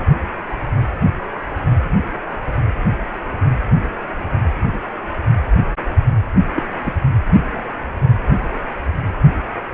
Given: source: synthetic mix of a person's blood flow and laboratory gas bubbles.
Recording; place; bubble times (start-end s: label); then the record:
Doppler ultrasound of blood flow; precordium
6.55-6.63 s: bubbles
6.83-6.93 s: bubbles
From the record:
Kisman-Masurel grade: 112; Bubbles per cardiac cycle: 1 to 2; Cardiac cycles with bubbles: 1 to 10%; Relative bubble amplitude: moderate (0.250 to 0.450); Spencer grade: 1 (occasional bubble signal discernible with the cardiac motion signal, with majority of cardiac periods free of bubbles); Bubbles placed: anywhere in the cardiac cycle